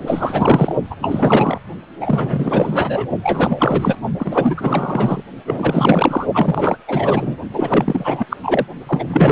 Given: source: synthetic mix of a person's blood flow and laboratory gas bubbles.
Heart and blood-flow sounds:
Doppler ultrasound of blood flow; precordium
0.07-0.75 s: bubbles
0.90-0.95 s: bubbles
1.02-1.58 s: bubbles
2.00-3.09 s: bubbles
3.23-3.97 s: bubbles
4.18-5.23 s: bubbles
5.45-6.26 s: bubbles
6.33-6.78 s: bubbles
6.87-7.36 s: bubbles
7.53-8.26 s: bubbles
8.29-8.37 s: bubbles
8.43-8.67 s: bubbles
8.87-9.32 s: bubbles
From the record:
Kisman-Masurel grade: 444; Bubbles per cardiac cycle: continuous sound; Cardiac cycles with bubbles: 100%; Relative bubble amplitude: maximal (0.775 to 0.999); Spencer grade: 4 (maximum detectable bubble signal sounding continuously throughout systole and diastole of every cardiac period, and overriding the amplitude of the normal cardiac signals); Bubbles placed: only in the low amplitude regions of the cardiac cycle

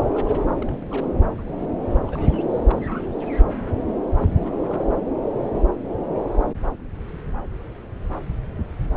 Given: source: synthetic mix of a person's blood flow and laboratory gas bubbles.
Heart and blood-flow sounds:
Doppler ultrasound of blood flow; subclavian vein
0.09-0.47 s: bubbles
0.57-1.08 s: bubbles
1.38-1.44 s: bubbles
1.48-1.56 s: bubbles
1.59-1.70 s: bubbles
1.91-2.45 s: bubbles
2.65-2.85 s: bubbles
2.89-3.01 s: bubbles
4.17-4.32 s: bubbles
4.38-4.41 s: bubbles
4.45-4.90 s: bubbles
From the record:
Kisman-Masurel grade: 221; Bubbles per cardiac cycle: several, 3 to 8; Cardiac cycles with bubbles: 10 to 50%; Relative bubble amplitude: barely perceptible (0.100 to 0.250); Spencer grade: 2 (many but less than half of the cardiac periods contain bubble signals, singularly or in groups); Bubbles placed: anywhere in the cardiac cycle

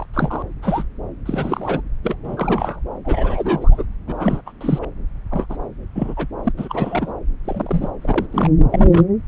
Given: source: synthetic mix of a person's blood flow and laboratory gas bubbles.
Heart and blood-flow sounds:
Doppler ultrasound of blood flow; subclavian vein
0.00-0.05 s: bubbles
0.14-0.42 s: bubbles
0.62-0.83 s: bubbles
1.26-1.81 s: bubbles
2.03-2.15 s: bubbles
2.24-2.80 s: bubbles
3.04-3.85 s: bubbles
4.07-4.41 s: bubbles
4.46-4.52 s: bubbles
4.61-4.85 s: bubbles
5.31-5.46 s: bubbles
5.49-5.57 s: bubbles
5.95-6.27 s: bubbles
6.44-6.52 s: bubbles
6.57-7.14 s: bubbles
7.45-7.91 s: bubbles
8.02-8.27 s: bubbles
8.31-8.51 s: bubbles
8.71-9.04 s: bubbles
From the record:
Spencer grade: 3 (all of the cardiac periods contain showers or single bubble signals, but not dominating or overriding the cardiac motion signals); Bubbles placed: anywhere in the cardiac cycle

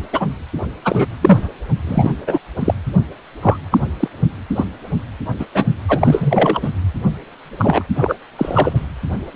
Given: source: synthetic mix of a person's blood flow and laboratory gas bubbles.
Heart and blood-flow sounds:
Doppler ultrasound of blood flow; precordium
0.12-0.27 s: bubbles
0.84-1.06 s: bubbles
1.21-1.49 s: bubbles
1.87-2.10 s: bubbles
2.26-2.38 s: bubbles
2.59-2.74 s: bubbles
3.42-3.57 s: bubbles
3.70-3.78 s: bubbles
3.99-4.08 s: bubbles
4.56-4.65 s: bubbles
5.39-5.46 s: bubbles
5.54-5.65 s: bubbles
5.88-6.71 s: bubbles
7.58-7.83 s: bubbles
7.96-8.15 s: bubbles
8.38-8.86 s: bubbles
From the record:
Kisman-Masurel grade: 243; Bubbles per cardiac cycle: several, 3 to 8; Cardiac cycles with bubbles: 100%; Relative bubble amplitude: loud (0.450 to 0.775); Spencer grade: 3 (all of the cardiac periods contain showers or single bubble signals, but not dominating or overriding the cardiac motion signals); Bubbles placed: anywhere in the cardiac cycle

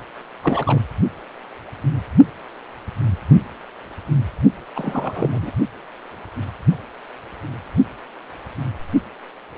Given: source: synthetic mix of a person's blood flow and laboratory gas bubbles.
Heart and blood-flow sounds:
Doppler ultrasound of blood flow; precordium
0.43-0.79 s: bubbles
4.75-5.52 s: bubbles
From the record:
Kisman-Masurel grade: 222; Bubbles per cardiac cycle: several, 3 to 8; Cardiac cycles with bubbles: 10 to 50%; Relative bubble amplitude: moderate (0.250 to 0.450); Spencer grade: 2 (many but less than half of the cardiac periods contain bubble signals, singularly or in groups); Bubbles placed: only in the low amplitude regions of the cardiac cycle

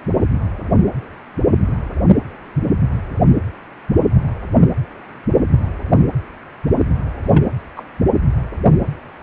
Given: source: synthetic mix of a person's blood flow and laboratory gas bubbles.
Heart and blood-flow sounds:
Doppler ultrasound of blood flow; precordium
1.68-1.76 s: bubbles
2.08-2.16 s: bubbles
7.26-7.44 s: bubbles
7.76-7.83 s: bubbles
From the record:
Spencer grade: 2 (many but less than half of the cardiac periods contain bubble signals, singularly or in groups); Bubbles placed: anywhere in the cardiac cycle

